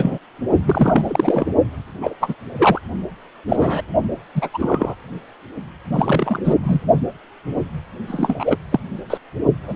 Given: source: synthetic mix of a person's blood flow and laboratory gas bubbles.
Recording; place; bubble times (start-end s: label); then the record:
Doppler ultrasound of blood flow; precordium
0.00-0.18 s: bubbles
0.63-1.46 s: bubbles
2.00-2.14 s: bubbles
2.21-2.35 s: bubbles
2.58-2.81 s: bubbles
3.49-3.81 s: bubbles
4.35-4.49 s: bubbles
4.54-4.95 s: bubbles
5.92-6.40 s: bubbles
6.44-6.54 s: bubbles
6.62-6.81 s: bubbles
8.07-8.57 s: bubbles
8.71-8.79 s: bubbles
9.09-9.17 s: bubbles
9.67-9.76 s: bubbles
From the record:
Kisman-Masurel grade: 233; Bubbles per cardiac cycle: several, 3 to 8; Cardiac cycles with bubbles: 50 to 99%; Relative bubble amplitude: loud (0.450 to 0.775); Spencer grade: 3 (all of the cardiac periods contain showers or single bubble signals, but not dominating or overriding the cardiac motion signals); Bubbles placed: only in the low amplitude regions of the cardiac cycle